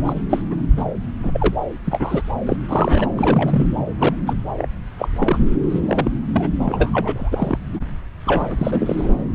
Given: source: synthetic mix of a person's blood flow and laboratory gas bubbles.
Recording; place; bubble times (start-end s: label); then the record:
Doppler ultrasound of blood flow; subclavian vein
0.05-0.13 s: bubbles
0.30-0.41 s: bubbles
0.50-0.55 s: bubbles
0.77-0.83 s: bubbles
1.23-1.55 s: bubbles
1.84-2.22 s: bubbles
2.46-2.56 s: bubbles
2.68-3.08 s: bubbles
3.16-3.67 s: bubbles
3.98-4.15 s: bubbles
4.26-4.34 s: bubbles
4.58-4.67 s: bubbles
4.98-5.08 s: bubbles
5.16-5.47 s: bubbles
5.69-6.11 s: bubbles
6.32-6.49 s: bubbles
6.58-6.90 s: bubbles
6.93-7.59 s: bubbles
7.73-7.79 s: bubbles
8.26-9.14 s: bubbles
From the record:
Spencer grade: 3 (all of the cardiac periods contain showers or single bubble signals, but not dominating or overriding the cardiac motion signals); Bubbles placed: anywhere in the cardiac cycle